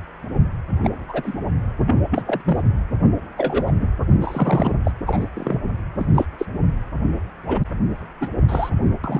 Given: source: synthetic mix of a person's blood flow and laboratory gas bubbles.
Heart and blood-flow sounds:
Doppler ultrasound of blood flow; precordium
0.83-0.90 s: bubbles
1.08-1.34 s: bubbles
1.87-1.96 s: bubbles
2.11-2.41 s: bubbles
2.44-2.63 s: bubbles
3.37-3.72 s: bubbles
3.79-3.89 s: bubbles
4.21-4.75 s: bubbles
4.84-4.91 s: bubbles
5.06-5.28 s: bubbles
5.34-5.61 s: bubbles
5.98-6.06 s: bubbles
6.14-6.26 s: bubbles
6.38-6.46 s: bubbles
7.47-7.59 s: bubbles
8.21-8.29 s: bubbles
8.49-8.70 s: bubbles
9.04-9.20 s: bubbles
From the record:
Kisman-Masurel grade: 233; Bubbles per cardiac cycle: several, 3 to 8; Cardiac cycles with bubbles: 50 to 99%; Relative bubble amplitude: loud (0.450 to 0.775); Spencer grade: 3 (all of the cardiac periods contain showers or single bubble signals, but not dominating or overriding the cardiac motion signals); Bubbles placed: anywhere in the cardiac cycle

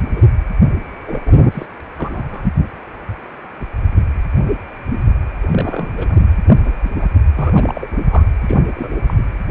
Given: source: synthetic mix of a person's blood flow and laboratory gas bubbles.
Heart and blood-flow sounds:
Doppler ultrasound of blood flow; precordium
0.00-0.23 s: bubbles
1.05-1.20 s: bubbles
1.24-1.41 s: bubbles
1.52-1.66 s: bubbles
1.97-2.49 s: bubbles
5.42-6.29 s: bubbles
6.47-6.54 s: bubbles
6.63-6.72 s: bubbles
6.83-6.92 s: bubbles
7.01-7.06 s: bubbles
7.36-7.88 s: bubbles
8.09-8.24 s: bubbles
8.41-8.59 s: bubbles
8.75-8.96 s: bubbles
9.06-9.14 s: bubbles
9.18-9.23 s: bubbles
From the record:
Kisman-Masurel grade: 222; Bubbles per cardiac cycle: several, 3 to 8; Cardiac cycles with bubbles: 10 to 50%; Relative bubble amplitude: moderate (0.250 to 0.450); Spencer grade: 2 (many but less than half of the cardiac periods contain bubble signals, singularly or in groups); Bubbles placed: anywhere in the cardiac cycle

